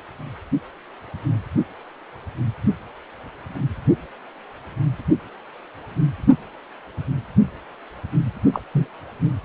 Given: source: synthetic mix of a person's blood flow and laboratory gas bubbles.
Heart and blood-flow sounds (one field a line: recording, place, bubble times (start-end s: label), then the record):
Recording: Doppler ultrasound of blood flow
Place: precordium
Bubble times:
8.53-8.61 s: bubbles
8.74-8.88 s: bubbles
From the record:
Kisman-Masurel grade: 112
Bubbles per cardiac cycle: 1 to 2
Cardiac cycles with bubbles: 1 to 10%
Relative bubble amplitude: moderate (0.250 to 0.450)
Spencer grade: 1 (occasional bubble signal discernible with the cardiac motion signal, with majority of cardiac periods free of bubbles)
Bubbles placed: only in the low amplitude regions of the cardiac cycle